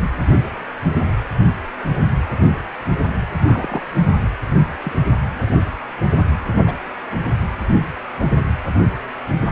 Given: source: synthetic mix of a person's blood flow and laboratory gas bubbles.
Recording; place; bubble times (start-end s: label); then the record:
Doppler ultrasound of blood flow; precordium
3.44-3.83 s: bubbles
4.84-4.92 s: bubbles
6.66-6.75 s: bubbles
From the record:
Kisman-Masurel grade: 122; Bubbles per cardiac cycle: 1 to 2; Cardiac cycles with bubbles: 10 to 50%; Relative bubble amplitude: moderate (0.250 to 0.450); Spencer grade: 2 (many but less than half of the cardiac periods contain bubble signals, singularly or in groups); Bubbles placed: anywhere in the cardiac cycle